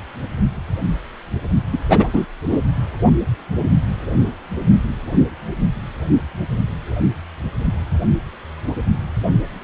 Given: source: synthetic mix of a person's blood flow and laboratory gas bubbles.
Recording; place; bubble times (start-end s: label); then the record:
Doppler ultrasound of blood flow; precordium
1.72-1.78 s: bubbles
1.89-2.08 s: bubbles
2.13-2.25 s: bubbles
2.49-2.58 s: bubbles
From the record:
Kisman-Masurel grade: 213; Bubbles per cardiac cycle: several, 3 to 8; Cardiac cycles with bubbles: 1 to 10%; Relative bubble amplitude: loud (0.450 to 0.775); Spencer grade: 1 (occasional bubble signal discernible with the cardiac motion signal, with majority of cardiac periods free of bubbles); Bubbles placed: only in the low amplitude regions of the cardiac cycle